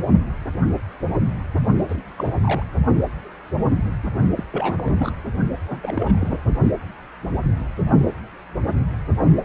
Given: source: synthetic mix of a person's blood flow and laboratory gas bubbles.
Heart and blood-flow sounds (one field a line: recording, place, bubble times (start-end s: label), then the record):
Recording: Doppler ultrasound of blood flow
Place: precordium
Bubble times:
1.88-1.98 s: bubbles
2.17-2.33 s: bubbles
2.35-2.40 s: bubbles
2.42-2.63 s: bubbles
4.37-4.44 s: bubbles
4.51-5.12 s: bubbles
5.62-5.64 s: bubbles
5.67-5.80 s: bubbles
5.83-6.38 s: bubbles
From the record:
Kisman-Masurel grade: 221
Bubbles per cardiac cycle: several, 3 to 8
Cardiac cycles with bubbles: 10 to 50%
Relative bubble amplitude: barely perceptible (0.100 to 0.250)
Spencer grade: 2 (many but less than half of the cardiac periods contain bubble signals, singularly or in groups)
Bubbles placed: only in the low amplitude regions of the cardiac cycle